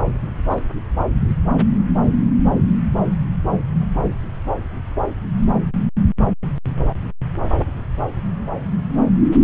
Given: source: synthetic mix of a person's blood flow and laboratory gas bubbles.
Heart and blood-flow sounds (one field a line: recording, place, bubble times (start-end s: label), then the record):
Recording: Doppler ultrasound of blood flow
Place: subclavian vein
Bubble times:
0.46-0.62 s: bubbles
From the record:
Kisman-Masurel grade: 111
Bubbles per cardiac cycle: 1 to 2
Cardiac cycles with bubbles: 1 to 10%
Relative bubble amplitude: barely perceptible (0.100 to 0.250)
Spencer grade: 1 (occasional bubble signal discernible with the cardiac motion signal, with majority of cardiac periods free of bubbles)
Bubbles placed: anywhere in the cardiac cycle